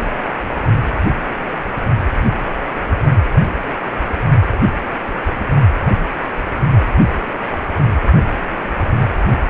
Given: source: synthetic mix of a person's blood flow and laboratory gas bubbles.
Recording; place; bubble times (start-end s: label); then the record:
Doppler ultrasound of blood flow; precordium
0.00-0.04 s: bubbles
0.18-0.34 s: bubbles
From the record:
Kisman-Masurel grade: 212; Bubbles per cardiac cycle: several, 3 to 8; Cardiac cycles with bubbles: 1 to 10%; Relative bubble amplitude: moderate (0.250 to 0.450); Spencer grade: 1 (occasional bubble signal discernible with the cardiac motion signal, with majority of cardiac periods free of bubbles); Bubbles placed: only in the low amplitude regions of the cardiac cycle